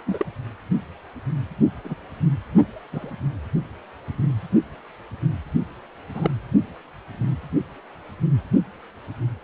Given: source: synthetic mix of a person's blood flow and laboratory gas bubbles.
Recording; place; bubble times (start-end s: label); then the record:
Doppler ultrasound of blood flow; precordium
0.07-0.26 s: bubbles
1.84-1.94 s: bubbles
2.92-3.10 s: bubbles
6.14-6.29 s: bubbles
From the record:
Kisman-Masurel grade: 122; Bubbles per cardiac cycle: 1 to 2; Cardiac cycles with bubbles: 10 to 50%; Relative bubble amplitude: moderate (0.250 to 0.450); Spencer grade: 2 (many but less than half of the cardiac periods contain bubble signals, singularly or in groups); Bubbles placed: only in the low amplitude regions of the cardiac cycle